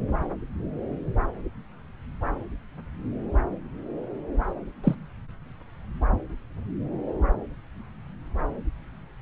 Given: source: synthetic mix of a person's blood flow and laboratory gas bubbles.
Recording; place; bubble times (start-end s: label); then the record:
Doppler ultrasound of blood flow; subclavian vein
4.83-4.95 s: bubbles
From the record:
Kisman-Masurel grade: 112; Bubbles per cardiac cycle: 1 to 2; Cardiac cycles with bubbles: 1 to 10%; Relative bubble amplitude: moderate (0.250 to 0.450); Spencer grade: 1 (occasional bubble signal discernible with the cardiac motion signal, with majority of cardiac periods free of bubbles); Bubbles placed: anywhere in the cardiac cycle